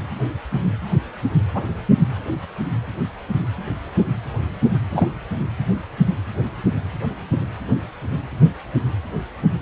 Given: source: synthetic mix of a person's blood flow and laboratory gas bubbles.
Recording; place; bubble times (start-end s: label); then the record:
Doppler ultrasound of blood flow; precordium
1.54-1.62 s: bubbles
4.92-5.08 s: bubbles
From the record:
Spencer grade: 1 (occasional bubble signal discernible with the cardiac motion signal, with majority of cardiac periods free of bubbles); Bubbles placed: anywhere in the cardiac cycle